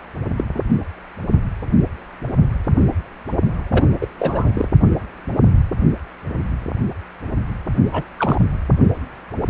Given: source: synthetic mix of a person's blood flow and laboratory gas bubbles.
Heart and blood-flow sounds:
Doppler ultrasound of blood flow; precordium
0.36-0.44 s: bubbles
0.54-0.60 s: bubbles
3.71-3.85 s: bubbles
4.01-4.07 s: bubbles
4.19-4.50 s: bubbles
4.54-4.68 s: bubbles
7.91-8.04 s: bubbles
8.18-8.40 s: bubbles
From the record:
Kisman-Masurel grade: 222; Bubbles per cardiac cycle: several, 3 to 8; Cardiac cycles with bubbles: 10 to 50%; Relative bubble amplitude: moderate (0.250 to 0.450); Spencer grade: 2 (many but less than half of the cardiac periods contain bubble signals, singularly or in groups); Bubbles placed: only in the low amplitude regions of the cardiac cycle

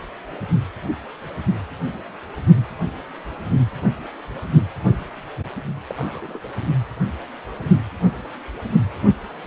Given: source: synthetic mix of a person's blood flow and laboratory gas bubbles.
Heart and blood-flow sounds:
Doppler ultrasound of blood flow; precordium
5.88-5.93 s: bubbles
5.96-6.39 s: bubbles
From the record:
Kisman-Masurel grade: 111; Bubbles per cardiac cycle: 1 to 2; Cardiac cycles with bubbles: 1 to 10%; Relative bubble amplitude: barely perceptible (0.100 to 0.250); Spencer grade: 1 (occasional bubble signal discernible with the cardiac motion signal, with majority of cardiac periods free of bubbles); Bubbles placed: only in the low amplitude regions of the cardiac cycle

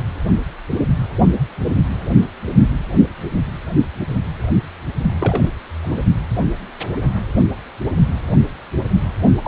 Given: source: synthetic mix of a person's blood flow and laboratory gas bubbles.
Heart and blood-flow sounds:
Doppler ultrasound of blood flow; precordium
5.19-5.49 s: bubbles
5.82-6.05 s: bubbles
9.42-9.48 s: bubbles
From the record:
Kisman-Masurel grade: 222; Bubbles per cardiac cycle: several, 3 to 8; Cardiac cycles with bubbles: 10 to 50%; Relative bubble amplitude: moderate (0.250 to 0.450); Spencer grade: 2 (many but less than half of the cardiac periods contain bubble signals, singularly or in groups); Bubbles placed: only in the low amplitude regions of the cardiac cycle

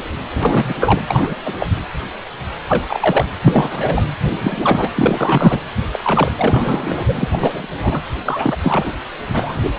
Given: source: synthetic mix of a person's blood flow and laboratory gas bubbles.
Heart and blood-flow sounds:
Doppler ultrasound of blood flow; precordium
0.33-1.02 s: bubbles
1.08-1.35 s: bubbles
1.44-1.54 s: bubbles
1.59-1.67 s: bubbles
2.69-3.26 s: bubbles
3.44-4.02 s: bubbles
4.39-4.90 s: bubbles
4.95-5.60 s: bubbles
5.92-6.31 s: bubbles
6.37-7.04 s: bubbles
7.08-7.29 s: bubbles
7.32-8.02 s: bubbles
8.25-8.56 s: bubbles
8.63-8.92 s: bubbles
9.33-9.60 s: bubbles
9.62-9.71 s: bubbles
From the record:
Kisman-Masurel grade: 333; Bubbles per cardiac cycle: rolling drumbeat, 9 or more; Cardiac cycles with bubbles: 50 to 99%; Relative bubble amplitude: loud (0.450 to 0.775); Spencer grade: 3 (all of the cardiac periods contain showers or single bubble signals, but not dominating or overriding the cardiac motion signals); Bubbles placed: anywhere in the cardiac cycle

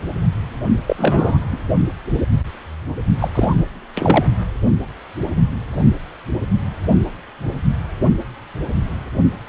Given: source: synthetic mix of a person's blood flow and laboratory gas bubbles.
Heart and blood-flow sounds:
Doppler ultrasound of blood flow; precordium
0.87-1.38 s: bubbles
1.51-1.57 s: bubbles
3.19-3.28 s: bubbles
3.34-3.65 s: bubbles
3.95-4.25 s: bubbles
From the record:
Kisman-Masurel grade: 223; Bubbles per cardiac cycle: several, 3 to 8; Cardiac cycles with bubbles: 10 to 50%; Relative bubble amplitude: loud (0.450 to 0.775); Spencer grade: 2 (many but less than half of the cardiac periods contain bubble signals, singularly or in groups); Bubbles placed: only in the low amplitude regions of the cardiac cycle

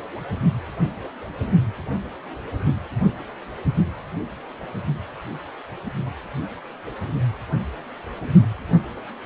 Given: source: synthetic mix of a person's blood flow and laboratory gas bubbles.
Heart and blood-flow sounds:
Doppler ultrasound of blood flow; precordium
no bubbles
From the record:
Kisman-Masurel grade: 000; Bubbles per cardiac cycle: 0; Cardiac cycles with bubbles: 0%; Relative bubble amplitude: no bubbles discernible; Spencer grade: 0 (complete lack of bubble signals)

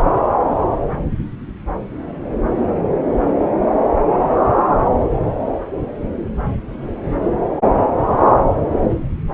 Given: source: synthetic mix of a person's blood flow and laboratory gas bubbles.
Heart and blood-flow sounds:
Doppler ultrasound of blood flow; subclavian vein
no bubbles
From the record:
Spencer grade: 0 (complete lack of bubble signals)

